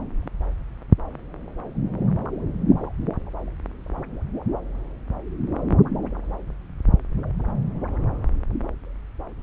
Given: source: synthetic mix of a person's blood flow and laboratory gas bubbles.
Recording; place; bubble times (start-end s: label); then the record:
Doppler ultrasound of blood flow; subclavian vein
no bubbles
From the record:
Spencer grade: 0 (complete lack of bubble signals)